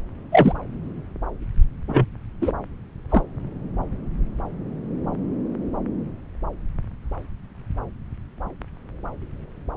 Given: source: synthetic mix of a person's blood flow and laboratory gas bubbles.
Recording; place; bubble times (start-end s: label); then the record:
Doppler ultrasound of blood flow; subclavian vein
0.32-0.54 s: bubbles
1.89-2.06 s: bubbles
2.42-2.52 s: bubbles
3.10-3.23 s: bubbles
From the record:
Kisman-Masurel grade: 123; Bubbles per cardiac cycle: 1 to 2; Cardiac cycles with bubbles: 10 to 50%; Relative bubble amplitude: loud (0.450 to 0.775); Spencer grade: 2 (many but less than half of the cardiac periods contain bubble signals, singularly or in groups); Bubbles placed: anywhere in the cardiac cycle